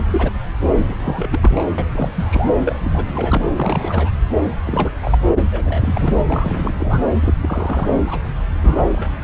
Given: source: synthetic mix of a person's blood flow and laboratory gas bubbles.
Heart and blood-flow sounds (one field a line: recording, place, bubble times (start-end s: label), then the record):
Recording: Doppler ultrasound of blood flow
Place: subclavian vein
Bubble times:
0.00-0.06 s: bubbles
0.11-0.31 s: bubbles
0.77-0.94 s: bubbles
0.99-1.64 s: bubbles
1.78-2.10 s: bubbles
2.16-2.50 s: bubbles
2.65-3.45 s: bubbles
3.56-4.10 s: bubbles
4.44-4.51 s: bubbles
4.63-4.91 s: bubbles
5.01-5.18 s: bubbles
5.30-5.42 s: bubbles
5.51-6.21 s: bubbles
6.29-7.00 s: bubbles
7.22-7.34 s: bubbles
7.41-7.97 s: bubbles
8.07-8.19 s: bubbles
8.62-8.83 s: bubbles
8.92-9.10 s: bubbles
From the record:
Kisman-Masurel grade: 342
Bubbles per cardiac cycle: rolling drumbeat, 9 or more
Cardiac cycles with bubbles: 100%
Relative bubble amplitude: moderate (0.250 to 0.450)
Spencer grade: 3 (all of the cardiac periods contain showers or single bubble signals, but not dominating or overriding the cardiac motion signals)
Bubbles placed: anywhere in the cardiac cycle